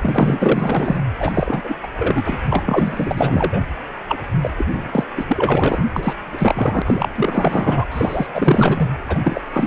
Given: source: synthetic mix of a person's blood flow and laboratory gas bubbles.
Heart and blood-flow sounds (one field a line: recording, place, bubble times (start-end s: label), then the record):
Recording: Doppler ultrasound of blood flow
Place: precordium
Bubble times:
0.01-1.05 s: bubbles
1.20-1.61 s: bubbles
1.64-1.77 s: bubbles
1.82-1.88 s: bubbles
1.98-2.42 s: bubbles
2.50-3.60 s: bubbles
4.08-4.20 s: bubbles
4.41-4.50 s: bubbles
4.57-4.68 s: bubbles
4.73-5.05 s: bubbles
5.17-5.84 s: bubbles
5.96-6.14 s: bubbles
6.33-6.82 s: bubbles
6.85-7.09 s: bubbles
7.15-7.85 s: bubbles
7.91-8.27 s: bubbles
8.34-8.89 s: bubbles
9.08-9.19 s: bubbles
9.24-9.41 s: bubbles
9.53-9.67 s: bubbles
From the record:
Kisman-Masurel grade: 444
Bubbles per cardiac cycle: continuous sound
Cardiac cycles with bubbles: 100%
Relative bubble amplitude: maximal (0.775 to 0.999)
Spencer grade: 4 (maximum detectable bubble signal sounding continuously throughout systole and diastole of every cardiac period, and overriding the amplitude of the normal cardiac signals)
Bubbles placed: anywhere in the cardiac cycle